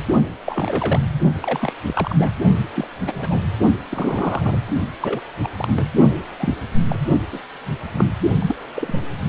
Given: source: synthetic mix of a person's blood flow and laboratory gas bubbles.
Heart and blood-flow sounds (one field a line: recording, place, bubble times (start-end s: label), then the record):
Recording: Doppler ultrasound of blood flow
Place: precordium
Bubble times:
0.46-0.99 s: bubbles
1.42-1.72 s: bubbles
1.83-2.31 s: bubbles
2.74-2.88 s: bubbles
3.06-3.12 s: bubbles
3.18-3.43 s: bubbles
3.91-4.59 s: bubbles
5.00-5.21 s: bubbles
5.42-5.48 s: bubbles
5.55-5.88 s: bubbles
6.38-6.55 s: bubbles
6.88-6.99 s: bubbles
7.32-7.40 s: bubbles
7.92-8.05 s: bubbles
8.42-8.46 s: bubbles
8.48-8.55 s: bubbles
8.75-9.00 s: bubbles
From the record:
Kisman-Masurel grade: 242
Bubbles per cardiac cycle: several, 3 to 8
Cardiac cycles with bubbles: 100%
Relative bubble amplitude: moderate (0.250 to 0.450)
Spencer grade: 3 (all of the cardiac periods contain showers or single bubble signals, but not dominating or overriding the cardiac motion signals)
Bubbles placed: only in the low amplitude regions of the cardiac cycle